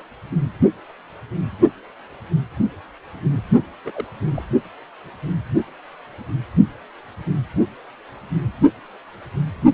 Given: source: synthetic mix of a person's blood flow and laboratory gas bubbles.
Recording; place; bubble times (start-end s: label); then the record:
Doppler ultrasound of blood flow; precordium
3.85-3.91 s: bubbles
3.94-4.04 s: bubbles
4.34-4.44 s: bubbles
From the record:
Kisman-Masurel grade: 211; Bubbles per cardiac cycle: several, 3 to 8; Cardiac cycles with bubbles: 1 to 10%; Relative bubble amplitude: barely perceptible (0.100 to 0.250); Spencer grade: 1 (occasional bubble signal discernible with the cardiac motion signal, with majority of cardiac periods free of bubbles); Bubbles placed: only in the low amplitude regions of the cardiac cycle